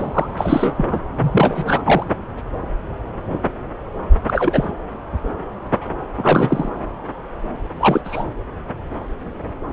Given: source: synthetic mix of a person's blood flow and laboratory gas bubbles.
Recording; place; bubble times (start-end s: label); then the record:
Doppler ultrasound of blood flow; subclavian vein
0.00-0.30 s: bubbles
0.37-0.85 s: bubbles
0.91-1.00 s: bubbles
1.18-2.04 s: bubbles
4.27-4.71 s: bubbles
6.17-6.69 s: bubbles
7.79-8.01 s: bubbles
8.04-8.25 s: bubbles
From the record:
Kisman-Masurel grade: 223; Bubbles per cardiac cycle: several, 3 to 8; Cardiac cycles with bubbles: 10 to 50%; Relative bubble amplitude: loud (0.450 to 0.775); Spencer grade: 2 (many but less than half of the cardiac periods contain bubble signals, singularly or in groups); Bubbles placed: anywhere in the cardiac cycle